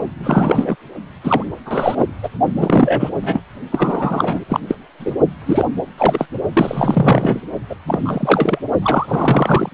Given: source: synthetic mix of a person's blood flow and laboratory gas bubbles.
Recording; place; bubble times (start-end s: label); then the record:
Doppler ultrasound of blood flow; precordium
0.22-0.76 s: bubbles
1.23-1.43 s: bubbles
1.66-2.06 s: bubbles
2.23-2.29 s: bubbles
2.55-3.10 s: bubbles
3.21-3.42 s: bubbles
3.71-4.44 s: bubbles
4.49-4.60 s: bubbles
4.67-4.75 s: bubbles
5.00-5.14 s: bubbles
5.46-5.65 s: bubbles
5.97-6.26 s: bubbles
6.53-7.40 s: bubbles
7.69-7.75 s: bubbles
7.85-8.58 s: bubbles
8.82-9.70 s: bubbles
From the record:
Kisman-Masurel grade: 343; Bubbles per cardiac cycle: rolling drumbeat, 9 or more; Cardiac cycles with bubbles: 100%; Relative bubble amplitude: loud (0.450 to 0.775); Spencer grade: 3 (all of the cardiac periods contain showers or single bubble signals, but not dominating or overriding the cardiac motion signals); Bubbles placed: only in the low amplitude regions of the cardiac cycle